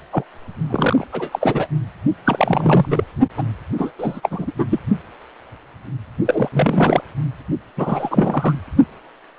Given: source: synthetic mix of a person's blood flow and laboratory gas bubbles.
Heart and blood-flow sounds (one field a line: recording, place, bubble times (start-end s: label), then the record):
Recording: Doppler ultrasound of blood flow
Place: precordium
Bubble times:
0.12-0.24 s: bubbles
0.69-1.07 s: bubbles
1.12-1.68 s: bubbles
2.25-2.86 s: bubbles
2.90-3.04 s: bubbles
3.37-3.43 s: bubbles
3.78-3.92 s: bubbles
3.98-4.52 s: bubbles
4.58-4.66 s: bubbles
4.70-4.79 s: bubbles
6.25-6.49 s: bubbles
6.52-7.02 s: bubbles
7.77-8.55 s: bubbles
From the record:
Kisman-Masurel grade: 333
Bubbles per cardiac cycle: rolling drumbeat, 9 or more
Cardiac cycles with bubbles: 50 to 99%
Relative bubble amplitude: loud (0.450 to 0.775)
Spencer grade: 3 (all of the cardiac periods contain showers or single bubble signals, but not dominating or overriding the cardiac motion signals)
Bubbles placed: only in the low amplitude regions of the cardiac cycle